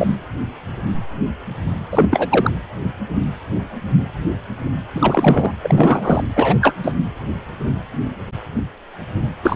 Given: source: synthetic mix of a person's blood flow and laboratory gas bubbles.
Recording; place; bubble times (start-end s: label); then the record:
Doppler ultrasound of blood flow; precordium
0.00-0.17 s: bubbles
1.91-2.51 s: bubbles
4.95-5.54 s: bubbles
5.62-6.24 s: bubbles
6.36-6.75 s: bubbles
6.83-6.95 s: bubbles
9.42-9.56 s: bubbles
From the record:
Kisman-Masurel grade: 333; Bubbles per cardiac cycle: rolling drumbeat, 9 or more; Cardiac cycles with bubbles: 50 to 99%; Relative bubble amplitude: loud (0.450 to 0.775); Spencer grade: 3 (all of the cardiac periods contain showers or single bubble signals, but not dominating or overriding the cardiac motion signals); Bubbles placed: anywhere in the cardiac cycle